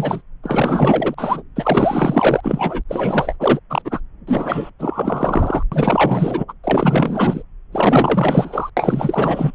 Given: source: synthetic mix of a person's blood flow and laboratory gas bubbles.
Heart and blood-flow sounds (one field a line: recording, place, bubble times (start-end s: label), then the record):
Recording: Doppler ultrasound of blood flow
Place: subclavian vein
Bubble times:
0.00-0.22 s: bubbles
0.43-1.15 s: bubbles
1.17-1.43 s: bubbles
1.55-2.82 s: bubbles
2.88-3.36 s: bubbles
3.40-3.60 s: bubbles
3.70-3.82 s: bubbles
3.85-4.00 s: bubbles
4.27-4.70 s: bubbles
4.79-5.63 s: bubbles
5.72-6.45 s: bubbles
6.48-6.53 s: bubbles
6.64-7.43 s: bubbles
7.72-8.70 s: bubbles
8.77-9.54 s: bubbles
From the record:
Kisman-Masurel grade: 444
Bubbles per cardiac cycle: continuous sound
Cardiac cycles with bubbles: 100%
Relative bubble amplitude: maximal (0.775 to 0.999)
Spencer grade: 4 (maximum detectable bubble signal sounding continuously throughout systole and diastole of every cardiac period, and overriding the amplitude of the normal cardiac signals)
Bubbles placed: anywhere in the cardiac cycle